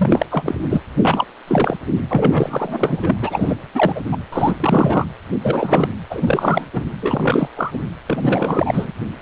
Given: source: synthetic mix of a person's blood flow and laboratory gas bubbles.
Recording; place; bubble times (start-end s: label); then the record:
Doppler ultrasound of blood flow; precordium
0.00-0.26 s: bubbles
0.31-0.60 s: bubbles
0.70-0.84 s: bubbles
1.03-1.25 s: bubbles
1.47-1.77 s: bubbles
2.09-3.16 s: bubbles
3.21-3.56 s: bubbles
3.75-4.00 s: bubbles
4.12-4.17 s: bubbles
4.32-4.57 s: bubbles
4.60-5.06 s: bubbles
5.42-5.96 s: bubbles
6.10-6.65 s: bubbles
6.73-6.83 s: bubbles
7.02-7.48 s: bubbles
7.56-7.79 s: bubbles
8.07-8.92 s: bubbles
From the record:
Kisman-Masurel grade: 343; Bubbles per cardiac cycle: rolling drumbeat, 9 or more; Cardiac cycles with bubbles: 100%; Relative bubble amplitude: loud (0.450 to 0.775); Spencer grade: 3 (all of the cardiac periods contain showers or single bubble signals, but not dominating or overriding the cardiac motion signals); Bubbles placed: anywhere in the cardiac cycle